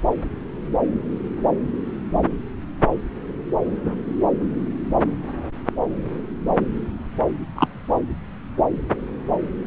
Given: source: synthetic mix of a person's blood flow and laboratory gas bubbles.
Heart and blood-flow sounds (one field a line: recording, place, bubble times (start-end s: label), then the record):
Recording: Doppler ultrasound of blood flow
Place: subclavian vein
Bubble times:
7.55-7.67 s: bubbles
From the record:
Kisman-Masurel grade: 113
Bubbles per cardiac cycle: 1 to 2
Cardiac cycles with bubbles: 1 to 10%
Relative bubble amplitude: loud (0.450 to 0.775)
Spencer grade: 1 (occasional bubble signal discernible with the cardiac motion signal, with majority of cardiac periods free of bubbles)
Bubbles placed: anywhere in the cardiac cycle